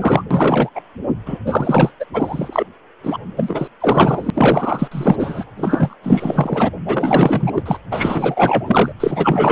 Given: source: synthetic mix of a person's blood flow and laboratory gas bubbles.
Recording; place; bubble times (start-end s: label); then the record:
Doppler ultrasound of blood flow; precordium
0.00-0.23 s: bubbles
0.31-0.71 s: bubbles
0.75-0.81 s: bubbles
1.26-1.40 s: bubbles
1.46-1.91 s: bubbles
1.99-2.05 s: bubbles
2.13-2.70 s: bubbles
3.03-3.18 s: bubbles
3.36-3.67 s: bubbles
3.80-4.31 s: bubbles
4.34-4.88 s: bubbles
4.92-5.44 s: bubbles
5.57-5.95 s: bubbles
6.03-6.71 s: bubbles
6.86-7.52 s: bubbles
7.55-7.63 s: bubbles
7.66-7.80 s: bubbles
7.91-8.92 s: bubbles
9.00-9.52 s: bubbles
From the record:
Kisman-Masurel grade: 444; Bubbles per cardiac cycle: continuous sound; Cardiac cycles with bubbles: 100%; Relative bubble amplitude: maximal (0.775 to 0.999); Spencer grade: 4 (maximum detectable bubble signal sounding continuously throughout systole and diastole of every cardiac period, and overriding the amplitude of the normal cardiac signals); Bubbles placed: anywhere in the cardiac cycle